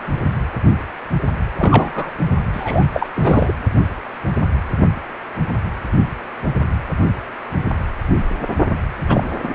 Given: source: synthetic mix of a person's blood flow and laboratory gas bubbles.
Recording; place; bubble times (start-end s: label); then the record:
Doppler ultrasound of blood flow; precordium
1.58-2.12 s: bubbles
2.52-2.85 s: bubbles
2.93-3.07 s: bubbles
3.15-3.52 s: bubbles
9.08-9.28 s: bubbles
9.43-9.55 s: bubbles
From the record:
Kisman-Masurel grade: 223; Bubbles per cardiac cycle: several, 3 to 8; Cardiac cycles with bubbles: 10 to 50%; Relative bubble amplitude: loud (0.450 to 0.775); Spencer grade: 2 (many but less than half of the cardiac periods contain bubble signals, singularly or in groups); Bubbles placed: anywhere in the cardiac cycle